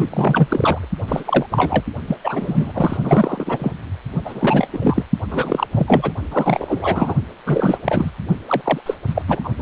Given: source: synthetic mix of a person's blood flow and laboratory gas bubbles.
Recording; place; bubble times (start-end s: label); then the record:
Doppler ultrasound of blood flow; precordium
0.00-0.08 s: bubbles
0.10-0.89 s: bubbles
1.08-1.46 s: bubbles
1.50-1.83 s: bubbles
2.07-2.17 s: bubbles
2.24-2.98 s: bubbles
3.03-3.74 s: bubbles
4.25-4.67 s: bubbles
4.72-5.02 s: bubbles
5.30-5.67 s: bubbles
5.74-6.12 s: bubbles
6.31-7.14 s: bubbles
7.46-7.78 s: bubbles
7.84-8.11 s: bubbles
8.47-8.61 s: bubbles
8.63-8.81 s: bubbles
8.86-8.94 s: bubbles
9.07-9.22 s: bubbles
9.27-9.49 s: bubbles
9.58-9.62 s: bubbles
From the record:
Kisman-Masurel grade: 343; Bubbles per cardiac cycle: rolling drumbeat, 9 or more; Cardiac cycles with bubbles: 100%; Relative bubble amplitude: loud (0.450 to 0.775); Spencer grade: 3 (all of the cardiac periods contain showers or single bubble signals, but not dominating or overriding the cardiac motion signals); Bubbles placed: only in the low amplitude regions of the cardiac cycle